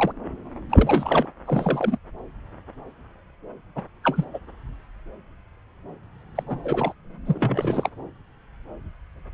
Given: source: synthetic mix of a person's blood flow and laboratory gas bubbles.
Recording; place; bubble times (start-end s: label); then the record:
Doppler ultrasound of blood flow; subclavian vein
0.00-0.12 s: bubbles
0.70-1.28 s: bubbles
1.46-1.98 s: bubbles
3.75-3.82 s: bubbles
4.03-4.24 s: bubbles
4.33-4.38 s: bubbles
6.35-6.44 s: bubbles
6.46-6.60 s: bubbles
6.63-6.92 s: bubbles
7.25-7.89 s: bubbles
From the record:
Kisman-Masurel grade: 221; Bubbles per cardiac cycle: several, 3 to 8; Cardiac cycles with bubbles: 10 to 50%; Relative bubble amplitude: barely perceptible (0.100 to 0.250); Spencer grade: 2 (many but less than half of the cardiac periods contain bubble signals, singularly or in groups); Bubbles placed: anywhere in the cardiac cycle